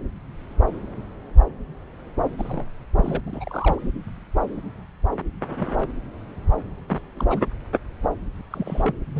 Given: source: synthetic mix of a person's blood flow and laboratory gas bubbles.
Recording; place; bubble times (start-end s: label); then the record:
Doppler ultrasound of blood flow; subclavian vein
2.38-2.66 s: bubbles
2.79-2.84 s: bubbles
2.96-3.21 s: bubbles
3.26-3.91 s: bubbles
5.51-5.92 s: bubbles
6.88-6.99 s: bubbles
7.16-7.26 s: bubbles
7.29-7.42 s: bubbles
8.50-8.94 s: bubbles
9.12-9.20 s: bubbles
From the record:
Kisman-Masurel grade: 221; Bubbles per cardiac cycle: several, 3 to 8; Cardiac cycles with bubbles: 10 to 50%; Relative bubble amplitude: barely perceptible (0.100 to 0.250); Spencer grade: 2 (many but less than half of the cardiac periods contain bubble signals, singularly or in groups); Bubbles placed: anywhere in the cardiac cycle